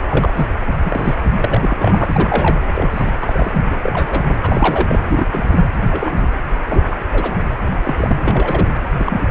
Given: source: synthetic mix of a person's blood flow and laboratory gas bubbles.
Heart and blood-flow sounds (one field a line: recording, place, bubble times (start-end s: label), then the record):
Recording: Doppler ultrasound of blood flow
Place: precordium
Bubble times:
0.00-0.03 s: bubbles
0.09-0.46 s: bubbles
0.84-1.15 s: bubbles
1.42-2.61 s: bubbles
2.75-3.12 s: bubbles
3.21-3.63 s: bubbles
3.83-4.35 s: bubbles
4.42-5.00 s: bubbles
5.09-5.26 s: bubbles
5.32-5.65 s: bubbles
5.81-6.27 s: bubbles
6.67-6.83 s: bubbles
6.91-6.96 s: bubbles
7.12-7.37 s: bubbles
7.50-7.55 s: bubbles
7.84-7.94 s: bubbles
7.97-8.16 s: bubbles
8.19-8.68 s: bubbles
8.99-9.21 s: bubbles
From the record:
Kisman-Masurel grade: 242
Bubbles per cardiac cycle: several, 3 to 8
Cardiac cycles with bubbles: 100%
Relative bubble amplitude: moderate (0.250 to 0.450)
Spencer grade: 3 (all of the cardiac periods contain showers or single bubble signals, but not dominating or overriding the cardiac motion signals)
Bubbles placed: anywhere in the cardiac cycle